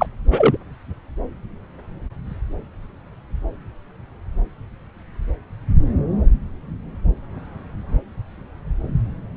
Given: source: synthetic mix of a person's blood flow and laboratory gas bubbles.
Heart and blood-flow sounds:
Doppler ultrasound of blood flow; subclavian vein
0.00-0.07 s: bubbles
0.30-0.57 s: bubbles
From the record:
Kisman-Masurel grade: 213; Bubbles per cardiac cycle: several, 3 to 8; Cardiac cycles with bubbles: 1 to 10%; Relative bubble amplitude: loud (0.450 to 0.775); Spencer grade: 1 (occasional bubble signal discernible with the cardiac motion signal, with majority of cardiac periods free of bubbles); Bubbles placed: anywhere in the cardiac cycle

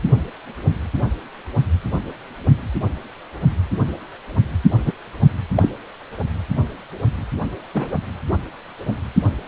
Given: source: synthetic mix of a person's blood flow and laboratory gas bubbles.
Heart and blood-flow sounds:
Doppler ultrasound of blood flow; precordium
4.86-4.93 s: bubbles
5.57-5.72 s: bubbles
7.74-7.91 s: bubbles
From the record:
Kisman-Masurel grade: 123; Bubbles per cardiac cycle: 1 to 2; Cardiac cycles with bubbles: 10 to 50%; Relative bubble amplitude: loud (0.450 to 0.775); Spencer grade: 2 (many but less than half of the cardiac periods contain bubble signals, singularly or in groups); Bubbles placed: anywhere in the cardiac cycle

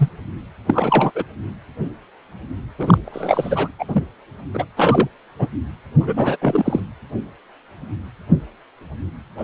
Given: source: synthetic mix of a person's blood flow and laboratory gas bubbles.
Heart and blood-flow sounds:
Doppler ultrasound of blood flow; precordium
0.00-0.09 s: bubbles
0.67-1.11 s: bubbles
1.15-1.24 s: bubbles
2.78-2.98 s: bubbles
3.04-3.69 s: bubbles
3.78-3.85 s: bubbles
3.87-4.04 s: bubbles
4.53-4.66 s: bubbles
4.77-5.08 s: bubbles
5.39-5.47 s: bubbles
6.00-6.37 s: bubbles
6.42-6.81 s: bubbles
9.37-9.44 s: bubbles
From the record:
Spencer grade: 3 (all of the cardiac periods contain showers or single bubble signals, but not dominating or overriding the cardiac motion signals); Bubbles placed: anywhere in the cardiac cycle

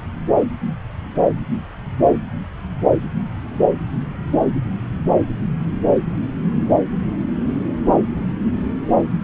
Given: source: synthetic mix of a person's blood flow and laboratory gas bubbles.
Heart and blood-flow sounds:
Doppler ultrasound of blood flow; subclavian vein
no bubbles
From the record:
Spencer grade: 0 (complete lack of bubble signals)

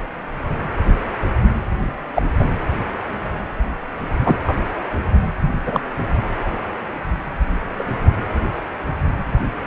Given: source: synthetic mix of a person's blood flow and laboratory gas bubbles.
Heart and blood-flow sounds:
Doppler ultrasound of blood flow; precordium
2.15-2.22 s: bubbles
2.39-2.46 s: bubbles
4.25-4.37 s: bubbles
4.47-4.55 s: bubbles
5.65-5.80 s: bubbles
7.79-7.83 s: bubbles
From the record:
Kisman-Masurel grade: 123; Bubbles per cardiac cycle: 1 to 2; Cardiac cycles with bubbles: 10 to 50%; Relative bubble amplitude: loud (0.450 to 0.775); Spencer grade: 2 (many but less than half of the cardiac periods contain bubble signals, singularly or in groups); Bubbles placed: anywhere in the cardiac cycle

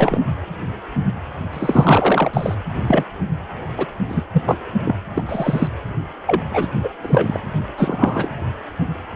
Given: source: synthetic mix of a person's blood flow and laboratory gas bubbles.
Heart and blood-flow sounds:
Doppler ultrasound of blood flow; precordium
0.00-0.21 s: bubbles
1.53-2.55 s: bubbles
2.87-3.06 s: bubbles
3.77-3.85 s: bubbles
4.08-4.24 s: bubbles
4.33-4.43 s: bubbles
4.46-4.55 s: bubbles
4.85-4.96 s: bubbles
5.14-5.26 s: bubbles
5.28-5.68 s: bubbles
6.26-6.42 s: bubbles
6.53-6.67 s: bubbles
6.83-6.89 s: bubbles
7.01-7.40 s: bubbles
7.74-8.36 s: bubbles
From the record:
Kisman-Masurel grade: 233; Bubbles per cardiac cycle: several, 3 to 8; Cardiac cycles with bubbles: 50 to 99%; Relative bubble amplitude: loud (0.450 to 0.775); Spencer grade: 3 (all of the cardiac periods contain showers or single bubble signals, but not dominating or overriding the cardiac motion signals); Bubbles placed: anywhere in the cardiac cycle

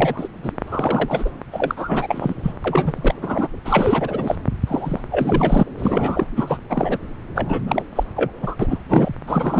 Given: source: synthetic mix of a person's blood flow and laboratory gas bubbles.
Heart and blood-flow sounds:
Doppler ultrasound of blood flow; subclavian vein
0.00-0.28 s: bubbles
0.43-0.52 s: bubbles
0.66-1.30 s: bubbles
1.52-2.33 s: bubbles
2.42-2.52 s: bubbles
2.64-2.93 s: bubbles
2.96-3.13 s: bubbles
3.22-3.48 s: bubbles
3.65-4.35 s: bubbles
4.67-5.00 s: bubbles
5.10-5.63 s: bubbles
5.79-6.26 s: bubbles
6.36-6.58 s: bubbles
6.69-6.97 s: bubbles
7.34-7.62 s: bubbles
7.67-7.83 s: bubbles
7.96-8.04 s: bubbles
8.16-8.31 s: bubbles
8.42-8.56 s: bubbles
8.59-8.78 s: bubbles
8.89-9.10 s: bubbles
9.27-9.60 s: bubbles
From the record:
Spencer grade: 3 (all of the cardiac periods contain showers or single bubble signals, but not dominating or overriding the cardiac motion signals); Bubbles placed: anywhere in the cardiac cycle

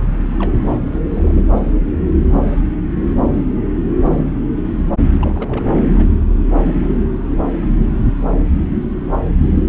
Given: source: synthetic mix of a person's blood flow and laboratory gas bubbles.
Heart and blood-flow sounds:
Doppler ultrasound of blood flow; subclavian vein
0.38-0.76 s: bubbles
0.91-1.01 s: bubbles
1.14-1.42 s: bubbles
5.20-5.65 s: bubbles
5.94-6.06 s: bubbles
6.20-6.25 s: bubbles
6.30-6.35 s: bubbles
From the record:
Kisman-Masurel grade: 221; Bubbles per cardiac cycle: several, 3 to 8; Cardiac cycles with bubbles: 10 to 50%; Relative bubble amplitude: barely perceptible (0.100 to 0.250); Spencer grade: 2 (many but less than half of the cardiac periods contain bubble signals, singularly or in groups); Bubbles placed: anywhere in the cardiac cycle

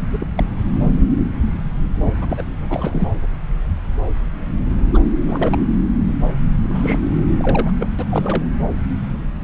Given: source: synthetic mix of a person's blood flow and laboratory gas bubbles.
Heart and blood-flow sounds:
Doppler ultrasound of blood flow; subclavian vein
0.12-0.27 s: bubbles
0.35-0.46 s: bubbles
2.21-2.44 s: bubbles
2.69-3.10 s: bubbles
4.94-5.00 s: bubbles
5.27-5.58 s: bubbles
6.62-6.98 s: bubbles
7.41-7.73 s: bubbles
7.78-7.86 s: bubbles
7.99-8.05 s: bubbles
8.10-8.48 s: bubbles
From the record:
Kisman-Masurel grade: 222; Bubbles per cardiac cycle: several, 3 to 8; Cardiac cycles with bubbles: 10 to 50%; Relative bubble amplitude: moderate (0.250 to 0.450); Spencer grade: 2 (many but less than half of the cardiac periods contain bubble signals, singularly or in groups); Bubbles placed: anywhere in the cardiac cycle

